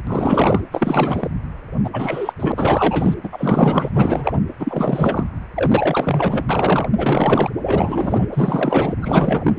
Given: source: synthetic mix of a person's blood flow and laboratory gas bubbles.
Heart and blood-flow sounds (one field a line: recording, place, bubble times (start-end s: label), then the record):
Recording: Doppler ultrasound of blood flow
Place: precordium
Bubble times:
0.00-0.02 s: bubbles
0.07-0.60 s: bubbles
0.71-1.28 s: bubbles
1.83-1.90 s: bubbles
1.92-2.33 s: bubbles
2.40-2.52 s: bubbles
2.56-3.15 s: bubbles
3.23-3.29 s: bubbles
3.32-4.39 s: bubbles
4.59-5.24 s: bubbles
5.54-6.46 s: bubbles
6.49-6.89 s: bubbles
6.95-7.50 s: bubbles
7.62-8.29 s: bubbles
8.32-8.94 s: bubbles
9.02-9.55 s: bubbles
From the record:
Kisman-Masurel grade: 444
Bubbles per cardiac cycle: continuous sound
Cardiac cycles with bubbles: 100%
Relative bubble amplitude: maximal (0.775 to 0.999)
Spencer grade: 4 (maximum detectable bubble signal sounding continuously throughout systole and diastole of every cardiac period, and overriding the amplitude of the normal cardiac signals)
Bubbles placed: anywhere in the cardiac cycle